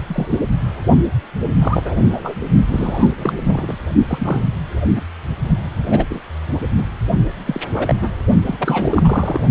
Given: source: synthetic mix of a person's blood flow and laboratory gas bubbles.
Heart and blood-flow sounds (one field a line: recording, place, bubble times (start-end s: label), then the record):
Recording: Doppler ultrasound of blood flow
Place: precordium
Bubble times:
0.00-0.03 s: bubbles
0.08-0.39 s: bubbles
1.60-2.35 s: bubbles
2.68-3.14 s: bubbles
3.17-3.33 s: bubbles
3.36-3.78 s: bubbles
4.08-4.42 s: bubbles
4.96-5.01 s: bubbles
5.90-6.05 s: bubbles
6.09-6.20 s: bubbles
6.76-6.86 s: bubbles
7.46-7.61 s: bubbles
7.73-7.95 s: bubbles
8.01-8.07 s: bubbles
8.46-9.41 s: bubbles
From the record:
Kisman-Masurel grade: 242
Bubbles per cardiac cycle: several, 3 to 8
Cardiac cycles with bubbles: 100%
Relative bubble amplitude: moderate (0.250 to 0.450)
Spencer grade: 3 (all of the cardiac periods contain showers or single bubble signals, but not dominating or overriding the cardiac motion signals)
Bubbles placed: only in the low amplitude regions of the cardiac cycle